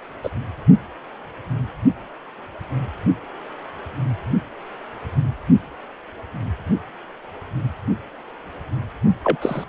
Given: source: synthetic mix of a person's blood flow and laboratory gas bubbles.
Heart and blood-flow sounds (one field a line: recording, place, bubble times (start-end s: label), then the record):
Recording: Doppler ultrasound of blood flow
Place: precordium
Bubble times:
0.23-0.30 s: bubbles
9.23-9.38 s: bubbles
9.42-9.64 s: bubbles
From the record:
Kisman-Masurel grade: 123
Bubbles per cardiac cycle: 1 to 2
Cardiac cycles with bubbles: 10 to 50%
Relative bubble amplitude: loud (0.450 to 0.775)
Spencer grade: 2 (many but less than half of the cardiac periods contain bubble signals, singularly or in groups)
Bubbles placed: only in the low amplitude regions of the cardiac cycle